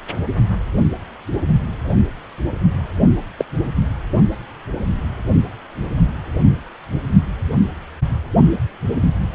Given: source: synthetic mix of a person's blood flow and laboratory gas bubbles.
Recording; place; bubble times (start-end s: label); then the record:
Doppler ultrasound of blood flow; precordium
3.38-3.45 s: bubbles
From the record:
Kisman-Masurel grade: 122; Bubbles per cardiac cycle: 1 to 2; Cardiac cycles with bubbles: 10 to 50%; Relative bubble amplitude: moderate (0.250 to 0.450); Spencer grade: 2 (many but less than half of the cardiac periods contain bubble signals, singularly or in groups); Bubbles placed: only in the low amplitude regions of the cardiac cycle